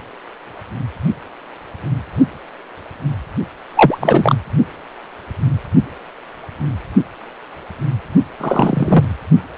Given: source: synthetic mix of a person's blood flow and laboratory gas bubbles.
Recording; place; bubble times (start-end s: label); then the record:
Doppler ultrasound of blood flow; precordium
3.75-3.97 s: bubbles
4.00-4.34 s: bubbles
8.40-9.04 s: bubbles
From the record:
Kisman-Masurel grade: 223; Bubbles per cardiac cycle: several, 3 to 8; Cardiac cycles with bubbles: 10 to 50%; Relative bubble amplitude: loud (0.450 to 0.775); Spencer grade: 2 (many but less than half of the cardiac periods contain bubble signals, singularly or in groups); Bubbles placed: only in the low amplitude regions of the cardiac cycle